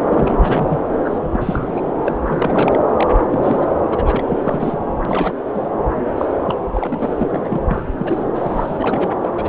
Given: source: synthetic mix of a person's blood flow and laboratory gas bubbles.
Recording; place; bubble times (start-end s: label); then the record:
Doppler ultrasound of blood flow; subclavian vein
0.00-0.03 s: bubbles
0.11-0.80 s: bubbles
1.04-1.19 s: bubbles
1.21-1.71 s: bubbles
1.76-1.81 s: bubbles
1.85-1.92 s: bubbles
2.02-2.79 s: bubbles
2.88-3.07 s: bubbles
3.17-3.25 s: bubbles
3.30-3.66 s: bubbles
3.90-4.24 s: bubbles
4.28-4.37 s: bubbles
4.42-4.79 s: bubbles
5.05-5.38 s: bubbles
5.54-5.67 s: bubbles
6.17-6.25 s: bubbles
6.47-6.57 s: bubbles
6.75-7.28 s: bubbles
7.32-7.60 s: bubbles
7.71-7.85 s: bubbles
7.98-8.23 s: bubbles
8.34-9.10 s: bubbles
9.22-9.28 s: bubbles
9.36-9.49 s: bubbles
From the record:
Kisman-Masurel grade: 342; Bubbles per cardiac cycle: rolling drumbeat, 9 or more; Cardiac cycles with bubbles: 100%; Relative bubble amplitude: moderate (0.250 to 0.450); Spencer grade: 3 (all of the cardiac periods contain showers or single bubble signals, but not dominating or overriding the cardiac motion signals); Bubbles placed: anywhere in the cardiac cycle